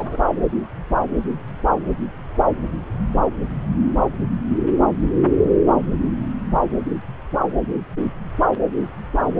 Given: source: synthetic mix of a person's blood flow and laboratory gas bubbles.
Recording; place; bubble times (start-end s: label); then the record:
Doppler ultrasound of blood flow; subclavian vein
0.00-0.17 s: bubbles
From the record:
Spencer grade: 1 (occasional bubble signal discernible with the cardiac motion signal, with majority of cardiac periods free of bubbles); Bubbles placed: anywhere in the cardiac cycle